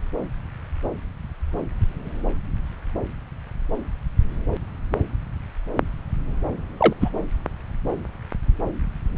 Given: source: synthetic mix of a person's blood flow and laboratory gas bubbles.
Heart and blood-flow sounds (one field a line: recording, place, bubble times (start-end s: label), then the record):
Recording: Doppler ultrasound of blood flow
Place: subclavian vein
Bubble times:
6.78-6.93 s: bubbles
7.00-7.10 s: bubbles
From the record:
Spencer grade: 1 (occasional bubble signal discernible with the cardiac motion signal, with majority of cardiac periods free of bubbles)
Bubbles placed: anywhere in the cardiac cycle